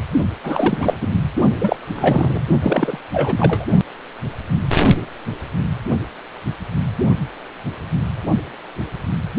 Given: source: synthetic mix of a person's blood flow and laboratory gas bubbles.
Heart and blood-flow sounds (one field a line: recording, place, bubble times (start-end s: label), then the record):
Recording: Doppler ultrasound of blood flow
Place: precordium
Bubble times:
0.43-0.97 s: bubbles
1.01-1.08 s: bubbles
1.60-1.76 s: bubbles
1.95-2.43 s: bubbles
2.62-2.98 s: bubbles
3.12-3.65 s: bubbles
From the record:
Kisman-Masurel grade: 333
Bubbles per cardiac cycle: rolling drumbeat, 9 or more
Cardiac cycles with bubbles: 50 to 99%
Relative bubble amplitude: loud (0.450 to 0.775)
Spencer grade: 3 (all of the cardiac periods contain showers or single bubble signals, but not dominating or overriding the cardiac motion signals)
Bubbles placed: only in the low amplitude regions of the cardiac cycle